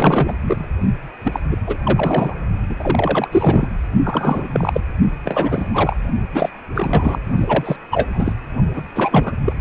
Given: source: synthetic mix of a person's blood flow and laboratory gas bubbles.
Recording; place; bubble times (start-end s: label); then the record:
Doppler ultrasound of blood flow; precordium
0.00-0.34 s: bubbles
0.46-0.65 s: bubbles
1.25-1.40 s: bubbles
1.50-1.56 s: bubbles
1.67-1.77 s: bubbles
1.83-2.34 s: bubbles
2.69-2.76 s: bubbles
2.78-3.28 s: bubbles
3.31-3.67 s: bubbles
4.04-4.47 s: bubbles
4.52-4.80 s: bubbles
5.25-5.96 s: bubbles
6.33-6.49 s: bubbles
6.75-7.20 s: bubbles
7.36-7.76 s: bubbles
7.91-8.33 s: bubbles
8.74-8.83 s: bubbles
8.95-9.32 s: bubbles
9.45-9.53 s: bubbles
From the record:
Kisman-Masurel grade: 342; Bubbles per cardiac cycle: rolling drumbeat, 9 or more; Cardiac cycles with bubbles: 100%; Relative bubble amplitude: moderate (0.250 to 0.450); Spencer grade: 3 (all of the cardiac periods contain showers or single bubble signals, but not dominating or overriding the cardiac motion signals); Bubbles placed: only in the low amplitude regions of the cardiac cycle